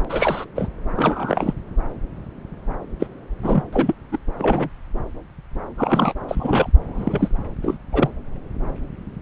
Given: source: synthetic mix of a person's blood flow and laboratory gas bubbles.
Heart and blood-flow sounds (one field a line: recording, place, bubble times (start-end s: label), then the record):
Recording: Doppler ultrasound of blood flow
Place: subclavian vein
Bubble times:
0.09-0.45 s: bubbles
0.56-0.68 s: bubbles
0.96-1.53 s: bubbles
3.00-3.06 s: bubbles
3.42-3.63 s: bubbles
3.73-3.94 s: bubbles
4.11-4.18 s: bubbles
4.38-4.69 s: bubbles
5.77-6.13 s: bubbles
6.28-6.69 s: bubbles
6.86-7.30 s: bubbles
7.62-7.78 s: bubbles
7.92-8.09 s: bubbles
From the record:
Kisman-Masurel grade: 232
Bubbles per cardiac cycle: several, 3 to 8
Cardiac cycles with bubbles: 50 to 99%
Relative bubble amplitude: moderate (0.250 to 0.450)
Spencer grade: 3 (all of the cardiac periods contain showers or single bubble signals, but not dominating or overriding the cardiac motion signals)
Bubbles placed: anywhere in the cardiac cycle